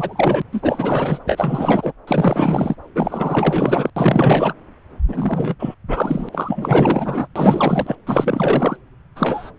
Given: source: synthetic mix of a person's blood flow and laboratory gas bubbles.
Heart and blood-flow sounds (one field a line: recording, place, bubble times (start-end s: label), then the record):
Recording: Doppler ultrasound of blood flow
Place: subclavian vein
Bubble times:
0.00-0.42 s: bubbles
0.52-1.19 s: bubbles
1.26-1.93 s: bubbles
2.07-2.75 s: bubbles
2.95-3.90 s: bubbles
3.96-4.54 s: bubbles
5.08-5.55 s: bubbles
5.59-5.75 s: bubbles
5.88-6.29 s: bubbles
6.32-7.27 s: bubbles
7.35-7.95 s: bubbles
8.07-8.77 s: bubbles
9.16-9.51 s: bubbles
From the record:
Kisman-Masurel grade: 444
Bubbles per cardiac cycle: continuous sound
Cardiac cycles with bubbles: 100%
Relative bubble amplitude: maximal (0.775 to 0.999)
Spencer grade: 4 (maximum detectable bubble signal sounding continuously throughout systole and diastole of every cardiac period, and overriding the amplitude of the normal cardiac signals)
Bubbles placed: anywhere in the cardiac cycle